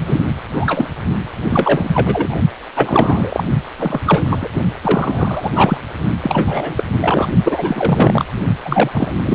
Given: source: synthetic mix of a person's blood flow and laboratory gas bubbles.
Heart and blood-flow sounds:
Doppler ultrasound of blood flow; precordium
0.00-0.03 s: bubbles
0.06-0.24 s: bubbles
0.55-0.90 s: bubbles
1.49-2.40 s: bubbles
2.75-3.44 s: bubbles
3.78-4.00 s: bubbles
4.03-4.23 s: bubbles
4.29-4.49 s: bubbles
4.83-5.51 s: bubbles
5.55-5.78 s: bubbles
6.22-6.83 s: bubbles
7.01-7.27 s: bubbles
7.44-8.24 s: bubbles
8.64-9.12 s: bubbles
9.25-9.35 s: bubbles
From the record:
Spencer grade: 3 (all of the cardiac periods contain showers or single bubble signals, but not dominating or overriding the cardiac motion signals); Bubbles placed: only in the low amplitude regions of the cardiac cycle

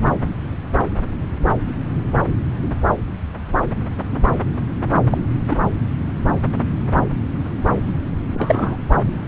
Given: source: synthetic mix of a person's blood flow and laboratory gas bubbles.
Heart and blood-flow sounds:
Doppler ultrasound of blood flow; subclavian vein
5.10-5.18 s: bubbles
5.49-5.56 s: bubbles
8.34-8.77 s: bubbles
From the record:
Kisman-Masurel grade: 123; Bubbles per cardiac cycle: 1 to 2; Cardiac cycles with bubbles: 10 to 50%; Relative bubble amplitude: loud (0.450 to 0.775); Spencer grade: 2 (many but less than half of the cardiac periods contain bubble signals, singularly or in groups); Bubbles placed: anywhere in the cardiac cycle

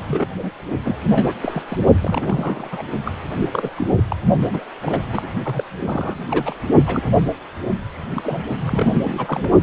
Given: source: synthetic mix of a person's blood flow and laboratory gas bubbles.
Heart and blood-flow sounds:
Doppler ultrasound of blood flow; precordium
0.08-0.26 s: bubbles
0.37-0.51 s: bubbles
0.85-1.33 s: bubbles
1.43-1.63 s: bubbles
1.68-1.78 s: bubbles
2.01-2.82 s: bubbles
3.05-3.12 s: bubbles
3.29-3.71 s: bubbles
3.75-3.87 s: bubbles
3.97-4.03 s: bubbles
4.09-4.16 s: bubbles
4.41-4.64 s: bubbles
4.81-5.33 s: bubbles
5.45-5.63 s: bubbles
5.80-6.21 s: bubbles
6.29-6.56 s: bubbles
6.85-7.10 s: bubbles
7.14-7.22 s: bubbles
7.92-8.44 s: bubbles
8.59-9.49 s: bubbles
From the record:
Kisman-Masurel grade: 342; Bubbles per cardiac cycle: rolling drumbeat, 9 or more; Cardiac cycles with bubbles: 100%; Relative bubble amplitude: moderate (0.250 to 0.450); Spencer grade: 3 (all of the cardiac periods contain showers or single bubble signals, but not dominating or overriding the cardiac motion signals); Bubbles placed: only in the low amplitude regions of the cardiac cycle

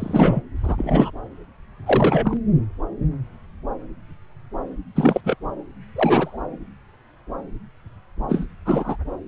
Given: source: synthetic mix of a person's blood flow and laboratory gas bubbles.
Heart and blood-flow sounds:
Doppler ultrasound of blood flow; subclavian vein
0.00-0.41 s: bubbles
0.63-1.10 s: bubbles
1.86-2.38 s: bubbles
4.95-5.21 s: bubbles
5.24-5.37 s: bubbles
5.96-6.38 s: bubbles
8.29-8.46 s: bubbles
8.65-8.96 s: bubbles
From the record:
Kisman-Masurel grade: 223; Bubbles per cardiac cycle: several, 3 to 8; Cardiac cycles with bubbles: 10 to 50%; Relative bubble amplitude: loud (0.450 to 0.775); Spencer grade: 2 (many but less than half of the cardiac periods contain bubble signals, singularly or in groups); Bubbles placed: anywhere in the cardiac cycle

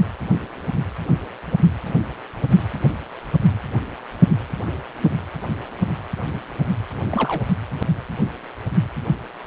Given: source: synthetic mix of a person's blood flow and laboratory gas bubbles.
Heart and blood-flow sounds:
Doppler ultrasound of blood flow; precordium
7.11-7.45 s: bubbles
From the record:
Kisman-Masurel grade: 211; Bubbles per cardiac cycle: several, 3 to 8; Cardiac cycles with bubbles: 1 to 10%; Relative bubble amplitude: barely perceptible (0.100 to 0.250); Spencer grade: 1 (occasional bubble signal discernible with the cardiac motion signal, with majority of cardiac periods free of bubbles); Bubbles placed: anywhere in the cardiac cycle

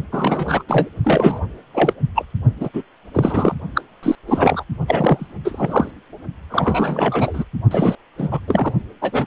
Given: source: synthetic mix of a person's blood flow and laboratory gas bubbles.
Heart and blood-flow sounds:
Doppler ultrasound of blood flow; precordium
0.12-0.63 s: bubbles
0.67-0.88 s: bubbles
1.04-1.42 s: bubbles
1.74-1.93 s: bubbles
2.15-2.25 s: bubbles
2.60-2.69 s: bubbles
2.73-2.83 s: bubbles
3.13-3.55 s: bubbles
3.74-3.81 s: bubbles
4.03-4.15 s: bubbles
4.27-4.64 s: bubbles
4.88-5.28 s: bubbles
5.45-5.91 s: bubbles
6.50-7.44 s: bubbles
7.71-7.97 s: bubbles
8.18-8.40 s: bubbles
8.47-8.73 s: bubbles
9.02-9.27 s: bubbles
From the record:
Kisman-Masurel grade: 343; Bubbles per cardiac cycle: rolling drumbeat, 9 or more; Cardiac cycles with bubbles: 100%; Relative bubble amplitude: loud (0.450 to 0.775); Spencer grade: 3 (all of the cardiac periods contain showers or single bubble signals, but not dominating or overriding the cardiac motion signals); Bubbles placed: only in the low amplitude regions of the cardiac cycle

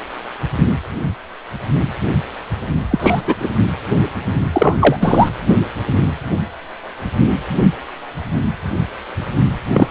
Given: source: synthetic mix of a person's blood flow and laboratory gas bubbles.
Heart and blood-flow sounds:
Doppler ultrasound of blood flow; precordium
2.90-3.21 s: bubbles
3.27-3.35 s: bubbles
3.40-3.49 s: bubbles
4.53-4.96 s: bubbles
5.00-5.29 s: bubbles
9.73-9.87 s: bubbles
From the record:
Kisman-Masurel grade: 223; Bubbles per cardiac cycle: several, 3 to 8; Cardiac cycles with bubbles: 10 to 50%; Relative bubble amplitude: loud (0.450 to 0.775); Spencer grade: 2 (many but less than half of the cardiac periods contain bubble signals, singularly or in groups); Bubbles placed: anywhere in the cardiac cycle

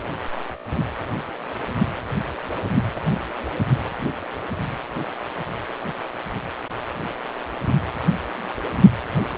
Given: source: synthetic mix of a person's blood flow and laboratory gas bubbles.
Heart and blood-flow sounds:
Doppler ultrasound of blood flow; precordium
2.96-3.01 s: bubbles
From the record:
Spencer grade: 1 (occasional bubble signal discernible with the cardiac motion signal, with majority of cardiac periods free of bubbles); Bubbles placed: anywhere in the cardiac cycle

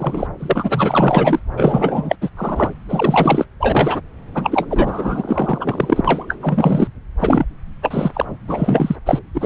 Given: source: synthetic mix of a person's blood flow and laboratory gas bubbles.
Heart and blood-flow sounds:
Doppler ultrasound of blood flow; subclavian vein
0.00-0.27 s: bubbles
0.40-1.39 s: bubbles
1.56-2.15 s: bubbles
2.21-2.30 s: bubbles
2.36-2.70 s: bubbles
2.88-3.45 s: bubbles
3.59-4.01 s: bubbles
4.35-6.01 s: bubbles
6.04-6.25 s: bubbles
6.28-6.38 s: bubbles
6.41-6.88 s: bubbles
7.20-7.45 s: bubbles
7.82-8.12 s: bubbles
8.14-8.25 s: bubbles
8.47-8.96 s: bubbles
9.05-9.19 s: bubbles
9.34-9.45 s: bubbles
From the record:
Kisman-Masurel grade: 444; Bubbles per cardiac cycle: continuous sound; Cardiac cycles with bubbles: 100%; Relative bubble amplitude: maximal (0.775 to 0.999); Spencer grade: 4 (maximum detectable bubble signal sounding continuously throughout systole and diastole of every cardiac period, and overriding the amplitude of the normal cardiac signals); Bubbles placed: anywhere in the cardiac cycle

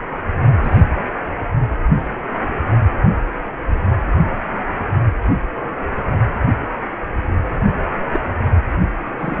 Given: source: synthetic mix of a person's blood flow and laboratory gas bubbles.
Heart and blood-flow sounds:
Doppler ultrasound of blood flow; precordium
0.63-0.81 s: bubbles
8.13-8.20 s: bubbles
9.18-9.40 s: bubbles
From the record:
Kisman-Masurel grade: 121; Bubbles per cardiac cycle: 1 to 2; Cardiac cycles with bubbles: 10 to 50%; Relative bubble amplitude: barely perceptible (0.100 to 0.250); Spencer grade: 2 (many but less than half of the cardiac periods contain bubble signals, singularly or in groups); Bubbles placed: anywhere in the cardiac cycle

